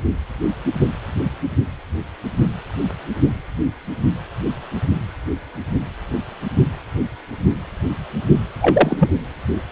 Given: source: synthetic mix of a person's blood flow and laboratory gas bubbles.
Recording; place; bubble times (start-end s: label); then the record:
Doppler ultrasound of blood flow; precordium
8.60-8.97 s: bubbles
8.99-9.10 s: bubbles
From the record:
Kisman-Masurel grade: 213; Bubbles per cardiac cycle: several, 3 to 8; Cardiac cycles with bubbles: 1 to 10%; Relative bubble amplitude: loud (0.450 to 0.775); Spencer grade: 1 (occasional bubble signal discernible with the cardiac motion signal, with majority of cardiac periods free of bubbles); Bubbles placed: anywhere in the cardiac cycle